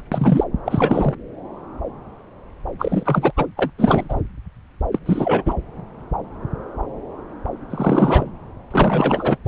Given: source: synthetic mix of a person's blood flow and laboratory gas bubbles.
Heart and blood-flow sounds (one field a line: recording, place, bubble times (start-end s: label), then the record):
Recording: Doppler ultrasound of blood flow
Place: subclavian vein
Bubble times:
0.12-0.44 s: bubbles
0.65-1.15 s: bubbles
2.79-3.32 s: bubbles
3.36-3.46 s: bubbles
3.56-3.70 s: bubbles
3.78-4.23 s: bubbles
4.92-4.99 s: bubbles
5.06-5.54 s: bubbles
7.70-8.31 s: bubbles
8.71-9.38 s: bubbles
9.44-9.48 s: bubbles
From the record:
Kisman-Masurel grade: 333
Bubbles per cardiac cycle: rolling drumbeat, 9 or more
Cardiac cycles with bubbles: 50 to 99%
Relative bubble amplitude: loud (0.450 to 0.775)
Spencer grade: 3 (all of the cardiac periods contain showers or single bubble signals, but not dominating or overriding the cardiac motion signals)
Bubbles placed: anywhere in the cardiac cycle